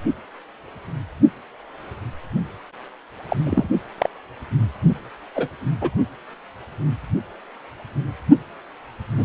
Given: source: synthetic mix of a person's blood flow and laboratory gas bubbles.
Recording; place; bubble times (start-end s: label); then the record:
Doppler ultrasound of blood flow; precordium
3.29-3.36 s: bubbles
3.44-3.67 s: bubbles
3.98-4.10 s: bubbles
5.36-5.48 s: bubbles
5.81-5.90 s: bubbles
9.15-9.24 s: bubbles
From the record:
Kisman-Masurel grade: 122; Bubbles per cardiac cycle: 1 to 2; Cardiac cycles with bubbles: 10 to 50%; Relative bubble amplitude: moderate (0.250 to 0.450); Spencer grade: 2 (many but less than half of the cardiac periods contain bubble signals, singularly or in groups); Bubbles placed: only in the low amplitude regions of the cardiac cycle